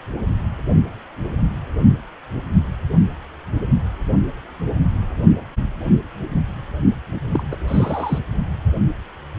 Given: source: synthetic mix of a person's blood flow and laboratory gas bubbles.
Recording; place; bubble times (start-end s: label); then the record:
Doppler ultrasound of blood flow; precordium
7.33-7.44 s: bubbles
7.51-7.55 s: bubbles
7.68-8.19 s: bubbles
From the record:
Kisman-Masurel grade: 212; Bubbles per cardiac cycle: several, 3 to 8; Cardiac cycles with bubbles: 1 to 10%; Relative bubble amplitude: moderate (0.250 to 0.450); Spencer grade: 1 (occasional bubble signal discernible with the cardiac motion signal, with majority of cardiac periods free of bubbles); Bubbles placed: only in the low amplitude regions of the cardiac cycle